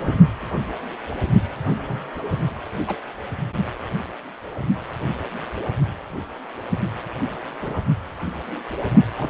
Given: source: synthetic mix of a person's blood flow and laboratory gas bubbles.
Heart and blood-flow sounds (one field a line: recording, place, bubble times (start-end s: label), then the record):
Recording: Doppler ultrasound of blood flow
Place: precordium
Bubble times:
0.00-0.17 s: bubbles
1.68-2.00 s: bubbles
2.87-2.96 s: bubbles
7.61-7.80 s: bubbles
9.16-9.30 s: bubbles
From the record:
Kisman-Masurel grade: 121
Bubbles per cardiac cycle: 1 to 2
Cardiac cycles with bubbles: 10 to 50%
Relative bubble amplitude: barely perceptible (0.100 to 0.250)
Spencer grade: 2 (many but less than half of the cardiac periods contain bubble signals, singularly or in groups)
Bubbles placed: only in the low amplitude regions of the cardiac cycle